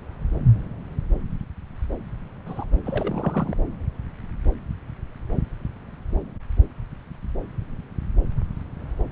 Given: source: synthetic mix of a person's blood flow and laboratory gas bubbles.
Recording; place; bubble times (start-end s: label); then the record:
Doppler ultrasound of blood flow; subclavian vein
2.46-2.65 s: bubbles
2.85-3.55 s: bubbles
From the record:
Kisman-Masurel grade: 211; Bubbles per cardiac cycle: several, 3 to 8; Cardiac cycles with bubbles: 1 to 10%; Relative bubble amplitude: barely perceptible (0.100 to 0.250); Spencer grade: 1 (occasional bubble signal discernible with the cardiac motion signal, with majority of cardiac periods free of bubbles); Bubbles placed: anywhere in the cardiac cycle